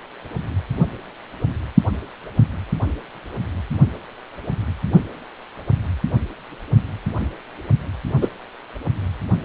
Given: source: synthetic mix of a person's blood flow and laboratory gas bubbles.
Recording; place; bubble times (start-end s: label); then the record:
Doppler ultrasound of blood flow; precordium
8.21-8.29 s: bubbles
From the record:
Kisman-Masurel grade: 123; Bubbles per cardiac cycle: 1 to 2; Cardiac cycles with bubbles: 10 to 50%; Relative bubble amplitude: loud (0.450 to 0.775); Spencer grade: 2 (many but less than half of the cardiac periods contain bubble signals, singularly or in groups); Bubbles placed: only in the low amplitude regions of the cardiac cycle